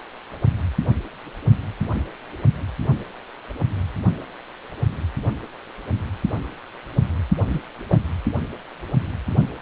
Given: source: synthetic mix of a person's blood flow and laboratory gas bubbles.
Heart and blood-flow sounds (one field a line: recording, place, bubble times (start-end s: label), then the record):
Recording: Doppler ultrasound of blood flow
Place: precordium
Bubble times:
7.50-7.59 s: bubbles
7.90-7.98 s: bubbles
From the record:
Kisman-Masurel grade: 113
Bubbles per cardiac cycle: 1 to 2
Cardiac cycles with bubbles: 1 to 10%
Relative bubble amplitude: loud (0.450 to 0.775)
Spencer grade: 1 (occasional bubble signal discernible with the cardiac motion signal, with majority of cardiac periods free of bubbles)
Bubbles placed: only in the low amplitude regions of the cardiac cycle